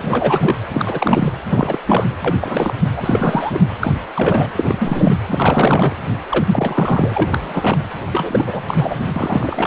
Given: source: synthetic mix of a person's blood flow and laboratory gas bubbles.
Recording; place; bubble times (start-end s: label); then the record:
Doppler ultrasound of blood flow; precordium
0.02-0.58 s: bubbles
0.73-1.32 s: bubbles
1.50-1.78 s: bubbles
1.86-2.05 s: bubbles
2.24-2.35 s: bubbles
2.40-2.74 s: bubbles
2.96-3.60 s: bubbles
3.79-3.96 s: bubbles
4.15-4.49 s: bubbles
4.56-5.17 s: bubbles
5.29-5.96 s: bubbles
6.29-6.45 s: bubbles
6.52-7.29 s: bubbles
7.33-7.83 s: bubbles
8.12-8.64 s: bubbles
8.68-9.02 s: bubbles
9.15-9.67 s: bubbles
From the record:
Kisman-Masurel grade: 343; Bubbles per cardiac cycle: rolling drumbeat, 9 or more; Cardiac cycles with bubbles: 100%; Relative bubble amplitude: loud (0.450 to 0.775); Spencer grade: 3 (all of the cardiac periods contain showers or single bubble signals, but not dominating or overriding the cardiac motion signals); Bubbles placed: anywhere in the cardiac cycle